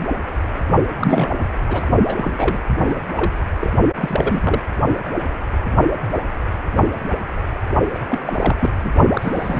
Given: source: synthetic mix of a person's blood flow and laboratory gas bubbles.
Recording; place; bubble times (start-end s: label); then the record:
Doppler ultrasound of blood flow; precordium
0.98-1.37 s: bubbles
1.69-1.86 s: bubbles
2.08-2.58 s: bubbles
2.84-2.95 s: bubbles
3.17-3.31 s: bubbles
3.61-3.73 s: bubbles
3.94-4.61 s: bubbles
7.93-8.70 s: bubbles
8.83-8.91 s: bubbles
9.15-9.59 s: bubbles
From the record:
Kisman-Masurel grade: 332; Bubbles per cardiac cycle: rolling drumbeat, 9 or more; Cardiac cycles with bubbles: 50 to 99%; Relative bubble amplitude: moderate (0.250 to 0.450); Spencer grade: 3 (all of the cardiac periods contain showers or single bubble signals, but not dominating or overriding the cardiac motion signals); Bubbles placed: only in the low amplitude regions of the cardiac cycle